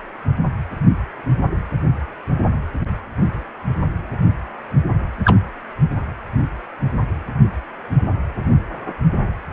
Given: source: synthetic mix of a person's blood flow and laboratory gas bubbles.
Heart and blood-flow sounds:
Doppler ultrasound of blood flow; precordium
5.25-5.36 s: bubbles
From the record:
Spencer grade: 2 (many but less than half of the cardiac periods contain bubble signals, singularly or in groups); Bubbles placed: only in the low amplitude regions of the cardiac cycle

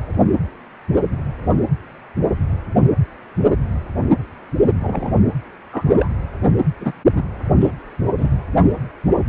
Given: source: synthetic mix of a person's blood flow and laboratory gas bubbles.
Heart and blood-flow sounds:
Doppler ultrasound of blood flow; precordium
4.80-5.18 s: bubbles
5.71-6.09 s: bubbles
6.80-6.92 s: bubbles
7.16-7.29 s: bubbles
7.60-7.71 s: bubbles
8.17-8.28 s: bubbles
From the record:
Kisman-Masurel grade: 122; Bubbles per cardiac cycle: 1 to 2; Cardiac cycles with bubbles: 10 to 50%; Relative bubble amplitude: moderate (0.250 to 0.450); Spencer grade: 2 (many but less than half of the cardiac periods contain bubble signals, singularly or in groups); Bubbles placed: anywhere in the cardiac cycle

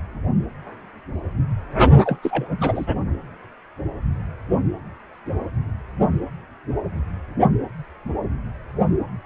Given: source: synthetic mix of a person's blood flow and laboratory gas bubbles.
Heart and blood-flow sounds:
Doppler ultrasound of blood flow; precordium
2.04-2.19 s: bubbles
2.22-2.52 s: bubbles
2.58-2.85 s: bubbles
From the record:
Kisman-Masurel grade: 212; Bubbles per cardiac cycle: several, 3 to 8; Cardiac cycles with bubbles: 1 to 10%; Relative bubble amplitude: moderate (0.250 to 0.450); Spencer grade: 1 (occasional bubble signal discernible with the cardiac motion signal, with majority of cardiac periods free of bubbles); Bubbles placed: only in the low amplitude regions of the cardiac cycle

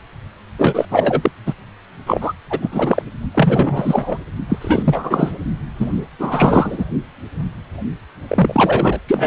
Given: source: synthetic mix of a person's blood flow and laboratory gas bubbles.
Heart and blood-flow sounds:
Doppler ultrasound of blood flow; precordium
0.58-0.85 s: bubbles
0.90-1.31 s: bubbles
1.46-1.54 s: bubbles
2.06-2.33 s: bubbles
2.50-3.02 s: bubbles
3.35-4.17 s: bubbles
4.49-4.58 s: bubbles
4.61-5.38 s: bubbles
5.78-6.05 s: bubbles
6.19-6.85 s: bubbles
8.28-9.00 s: bubbles
9.07-9.27 s: bubbles
From the record:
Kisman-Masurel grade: 333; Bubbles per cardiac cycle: rolling drumbeat, 9 or more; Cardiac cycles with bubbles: 50 to 99%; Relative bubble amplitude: loud (0.450 to 0.775); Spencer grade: 3 (all of the cardiac periods contain showers or single bubble signals, but not dominating or overriding the cardiac motion signals); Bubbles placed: only in the low amplitude regions of the cardiac cycle

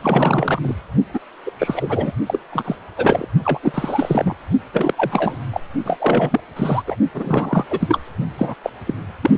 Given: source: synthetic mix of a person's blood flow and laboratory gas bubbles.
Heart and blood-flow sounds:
Doppler ultrasound of blood flow; precordium
0.01-0.75 s: bubbles
1.13-1.19 s: bubbles
1.45-1.51 s: bubbles
1.59-2.12 s: bubbles
2.26-2.39 s: bubbles
2.51-2.75 s: bubbles
2.97-3.27 s: bubbles
3.45-3.58 s: bubbles
3.63-4.35 s: bubbles
4.73-4.94 s: bubbles
4.97-5.43 s: bubbles
5.51-5.61 s: bubbles
5.85-5.97 s: bubbles
6.00-6.40 s: bubbles
6.56-6.83 s: bubbles
6.87-6.96 s: bubbles
7.14-7.65 s: bubbles
7.70-7.99 s: bubbles
8.38-8.54 s: bubbles
8.63-8.70 s: bubbles
8.87-8.94 s: bubbles
9.22-9.30 s: bubbles
From the record:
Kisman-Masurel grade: 342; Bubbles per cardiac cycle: rolling drumbeat, 9 or more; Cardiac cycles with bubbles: 100%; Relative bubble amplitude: moderate (0.250 to 0.450); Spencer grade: 3 (all of the cardiac periods contain showers or single bubble signals, but not dominating or overriding the cardiac motion signals); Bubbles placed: only in the low amplitude regions of the cardiac cycle

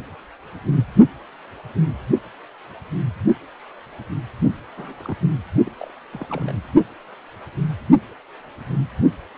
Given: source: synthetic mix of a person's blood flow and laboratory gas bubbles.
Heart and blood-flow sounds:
Doppler ultrasound of blood flow; precordium
4.77-5.17 s: bubbles
5.66-5.71 s: bubbles
5.81-5.91 s: bubbles
6.12-6.52 s: bubbles
From the record:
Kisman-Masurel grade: 221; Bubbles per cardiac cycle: several, 3 to 8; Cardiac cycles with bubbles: 10 to 50%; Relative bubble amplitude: barely perceptible (0.100 to 0.250); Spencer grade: 2 (many but less than half of the cardiac periods contain bubble signals, singularly or in groups); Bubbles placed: only in the low amplitude regions of the cardiac cycle

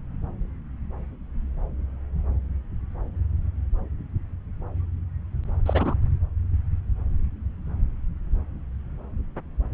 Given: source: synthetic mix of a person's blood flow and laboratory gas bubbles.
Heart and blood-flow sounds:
Doppler ultrasound of blood flow; subclavian vein
5.66-5.95 s: bubbles
From the record:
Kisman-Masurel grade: 222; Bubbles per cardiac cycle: several, 3 to 8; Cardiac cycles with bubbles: 10 to 50%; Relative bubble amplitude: moderate (0.250 to 0.450); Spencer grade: 2 (many but less than half of the cardiac periods contain bubble signals, singularly or in groups); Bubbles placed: anywhere in the cardiac cycle

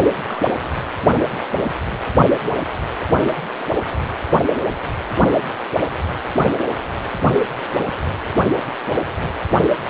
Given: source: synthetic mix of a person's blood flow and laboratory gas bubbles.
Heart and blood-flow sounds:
Doppler ultrasound of blood flow; precordium
0.25-0.42 s: bubbles
From the record:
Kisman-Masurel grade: 111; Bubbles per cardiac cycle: 1 to 2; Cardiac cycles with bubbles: 1 to 10%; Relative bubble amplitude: barely perceptible (0.100 to 0.250); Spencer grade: 1 (occasional bubble signal discernible with the cardiac motion signal, with majority of cardiac periods free of bubbles); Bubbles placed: anywhere in the cardiac cycle

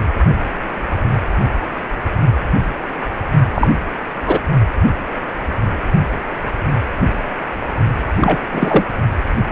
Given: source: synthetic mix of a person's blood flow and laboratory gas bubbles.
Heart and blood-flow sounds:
Doppler ultrasound of blood flow; precordium
3.54-3.68 s: bubbles
4.26-4.39 s: bubbles
8.20-8.38 s: bubbles
8.52-8.84 s: bubbles
From the record:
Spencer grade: 2 (many but less than half of the cardiac periods contain bubble signals, singularly or in groups); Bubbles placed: only in the low amplitude regions of the cardiac cycle

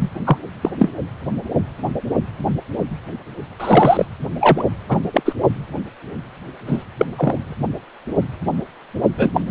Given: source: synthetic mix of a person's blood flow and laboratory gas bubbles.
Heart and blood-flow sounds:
Doppler ultrasound of blood flow; precordium
0.00-0.10 s: bubbles
0.26-0.37 s: bubbles
0.61-0.70 s: bubbles
0.79-0.91 s: bubbles
3.60-4.05 s: bubbles
4.40-4.63 s: bubbles
4.88-5.00 s: bubbles
5.13-5.34 s: bubbles
6.66-6.84 s: bubbles
6.97-7.05 s: bubbles
7.15-7.56 s: bubbles
9.17-9.51 s: bubbles
From the record:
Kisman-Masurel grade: 233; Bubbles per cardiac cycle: several, 3 to 8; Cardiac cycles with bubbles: 50 to 99%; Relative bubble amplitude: loud (0.450 to 0.775); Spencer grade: 3 (all of the cardiac periods contain showers or single bubble signals, but not dominating or overriding the cardiac motion signals); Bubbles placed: only in the low amplitude regions of the cardiac cycle

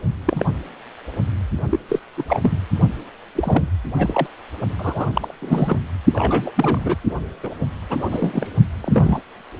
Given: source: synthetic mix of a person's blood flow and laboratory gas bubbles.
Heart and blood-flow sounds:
Doppler ultrasound of blood flow; precordium
0.25-0.45 s: bubbles
1.70-1.80 s: bubbles
1.89-2.00 s: bubbles
2.17-2.23 s: bubbles
2.27-2.58 s: bubbles
3.35-3.67 s: bubbles
3.98-4.27 s: bubbles
4.78-5.06 s: bubbles
5.12-5.34 s: bubbles
5.42-5.77 s: bubbles
6.12-6.51 s: bubbles
6.55-6.96 s: bubbles
7.43-7.50 s: bubbles
7.89-8.06 s: bubbles
8.11-8.47 s: bubbles
8.80-9.21 s: bubbles
From the record:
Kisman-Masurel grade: 232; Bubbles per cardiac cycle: several, 3 to 8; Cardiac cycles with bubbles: 50 to 99%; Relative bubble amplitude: moderate (0.250 to 0.450); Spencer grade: 3 (all of the cardiac periods contain showers or single bubble signals, but not dominating or overriding the cardiac motion signals); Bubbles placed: only in the low amplitude regions of the cardiac cycle

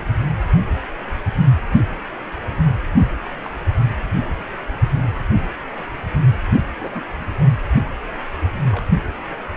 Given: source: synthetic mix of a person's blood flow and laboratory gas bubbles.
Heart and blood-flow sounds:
Doppler ultrasound of blood flow; precordium
3.44-3.50 s: bubbles
4.36-4.52 s: bubbles
6.81-7.03 s: bubbles
8.71-8.85 s: bubbles
From the record:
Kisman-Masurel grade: 121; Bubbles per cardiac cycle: 1 to 2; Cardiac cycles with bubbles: 10 to 50%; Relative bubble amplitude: barely perceptible (0.100 to 0.250); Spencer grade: 2 (many but less than half of the cardiac periods contain bubble signals, singularly or in groups); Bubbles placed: only in the low amplitude regions of the cardiac cycle

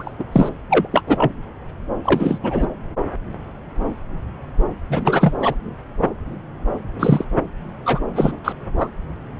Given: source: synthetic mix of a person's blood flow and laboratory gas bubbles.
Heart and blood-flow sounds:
Doppler ultrasound of blood flow; subclavian vein
0.00-0.11 s: bubbles
0.19-0.24 s: bubbles
0.32-0.49 s: bubbles
0.69-0.88 s: bubbles
0.91-1.02 s: bubbles
1.06-1.32 s: bubbles
2.04-2.39 s: bubbles
2.42-2.67 s: bubbles
4.89-5.35 s: bubbles
5.41-5.55 s: bubbles
6.99-7.25 s: bubbles
7.85-8.00 s: bubbles
8.13-8.36 s: bubbles
8.44-8.53 s: bubbles
8.78-8.89 s: bubbles
From the record:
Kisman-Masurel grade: 223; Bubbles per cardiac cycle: several, 3 to 8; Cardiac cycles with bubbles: 10 to 50%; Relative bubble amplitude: loud (0.450 to 0.775); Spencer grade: 2 (many but less than half of the cardiac periods contain bubble signals, singularly or in groups); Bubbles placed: anywhere in the cardiac cycle

